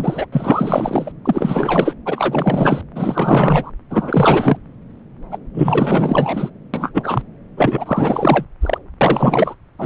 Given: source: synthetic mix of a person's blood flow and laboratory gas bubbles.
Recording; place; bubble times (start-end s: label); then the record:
Doppler ultrasound of blood flow; subclavian vein
0.00-0.27 s: bubbles
0.32-1.12 s: bubbles
1.25-1.95 s: bubbles
2.06-2.81 s: bubbles
2.95-3.71 s: bubbles
3.90-4.57 s: bubbles
5.31-5.38 s: bubbles
5.54-6.50 s: bubbles
6.74-6.92 s: bubbles
6.94-7.23 s: bubbles
7.57-8.46 s: bubbles
8.61-8.78 s: bubbles
9.01-9.55 s: bubbles
9.78-9.86 s: bubbles
From the record:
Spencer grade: 4 (maximum detectable bubble signal sounding continuously throughout systole and diastole of every cardiac period, and overriding the amplitude of the normal cardiac signals); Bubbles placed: anywhere in the cardiac cycle